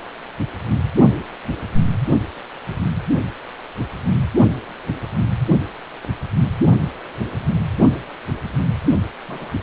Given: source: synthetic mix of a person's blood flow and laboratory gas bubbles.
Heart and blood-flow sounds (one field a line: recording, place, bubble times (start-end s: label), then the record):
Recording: Doppler ultrasound of blood flow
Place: precordium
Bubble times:
9.28-9.54 s: bubbles
From the record:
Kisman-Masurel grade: 121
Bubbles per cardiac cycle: 1 to 2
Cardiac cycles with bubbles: 10 to 50%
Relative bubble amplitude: barely perceptible (0.100 to 0.250)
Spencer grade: 2 (many but less than half of the cardiac periods contain bubble signals, singularly or in groups)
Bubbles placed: only in the low amplitude regions of the cardiac cycle